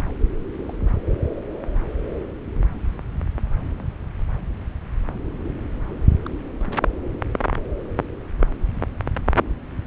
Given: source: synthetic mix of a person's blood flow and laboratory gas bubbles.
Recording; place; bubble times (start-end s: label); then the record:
Doppler ultrasound of blood flow; subclavian vein
0.60-0.80 s: bubbles
6.26-6.29 s: bubbles
6.66-6.73 s: bubbles
From the record:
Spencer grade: 2 (many but less than half of the cardiac periods contain bubble signals, singularly or in groups); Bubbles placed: anywhere in the cardiac cycle